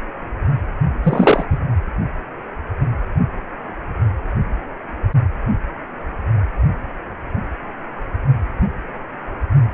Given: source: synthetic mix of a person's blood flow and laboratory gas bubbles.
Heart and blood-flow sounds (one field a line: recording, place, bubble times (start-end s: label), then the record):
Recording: Doppler ultrasound of blood flow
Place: precordium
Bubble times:
1.03-1.45 s: bubbles
1.50-1.58 s: bubbles
From the record:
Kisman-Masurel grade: 223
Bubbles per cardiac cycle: several, 3 to 8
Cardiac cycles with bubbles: 10 to 50%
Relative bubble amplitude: loud (0.450 to 0.775)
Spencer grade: 2 (many but less than half of the cardiac periods contain bubble signals, singularly or in groups)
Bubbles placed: anywhere in the cardiac cycle